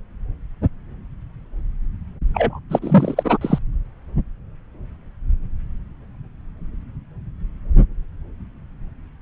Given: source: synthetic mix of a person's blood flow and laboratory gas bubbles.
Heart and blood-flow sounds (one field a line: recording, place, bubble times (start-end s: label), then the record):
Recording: Doppler ultrasound of blood flow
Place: subclavian vein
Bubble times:
2.33-2.59 s: bubbles
2.70-2.79 s: bubbles
2.82-3.38 s: bubbles
3.41-3.58 s: bubbles
From the record:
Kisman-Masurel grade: 223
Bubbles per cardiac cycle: several, 3 to 8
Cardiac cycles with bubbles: 10 to 50%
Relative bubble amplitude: loud (0.450 to 0.775)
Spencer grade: 2 (many but less than half of the cardiac periods contain bubble signals, singularly or in groups)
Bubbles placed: anywhere in the cardiac cycle